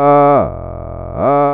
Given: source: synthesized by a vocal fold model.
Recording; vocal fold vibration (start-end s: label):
sustained vowel that changes in the middle
0.00-0.32 s: 143.3 Hz, open quotient 0.33
0.52-1.12 s: 43.0 Hz, open quotient 0.37
1.32-1.54 s: 143.3 Hz, open quotient 0.33